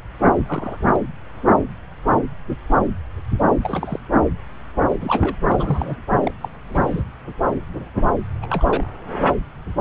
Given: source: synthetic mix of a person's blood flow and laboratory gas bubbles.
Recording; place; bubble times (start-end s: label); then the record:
Doppler ultrasound of blood flow; subclavian vein
0.46-0.78 s: bubbles
0.80-0.96 s: bubbles
3.63-4.00 s: bubbles
4.88-4.95 s: bubbles
5.00-5.36 s: bubbles
5.45-5.96 s: bubbles
6.24-6.32 s: bubbles
6.42-6.49 s: bubbles
6.66-7.03 s: bubbles
8.42-8.46 s: bubbles
8.49-8.87 s: bubbles
From the record:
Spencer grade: 2 (many but less than half of the cardiac periods contain bubble signals, singularly or in groups); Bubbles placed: anywhere in the cardiac cycle